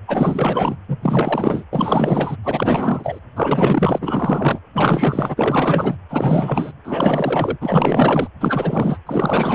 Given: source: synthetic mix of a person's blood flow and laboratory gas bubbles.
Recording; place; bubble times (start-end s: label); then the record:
Doppler ultrasound of blood flow; precordium
0.08-0.76 s: bubbles
0.88-0.98 s: bubbles
1.02-1.65 s: bubbles
1.73-2.37 s: bubbles
2.43-3.19 s: bubbles
3.35-3.98 s: bubbles
4.01-4.59 s: bubbles
4.73-5.96 s: bubbles
6.09-6.72 s: bubbles
6.84-7.57 s: bubbles
7.60-8.28 s: bubbles
8.40-8.99 s: bubbles
9.07-9.55 s: bubbles
From the record:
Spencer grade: 4 (maximum detectable bubble signal sounding continuously throughout systole and diastole of every cardiac period, and overriding the amplitude of the normal cardiac signals); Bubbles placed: anywhere in the cardiac cycle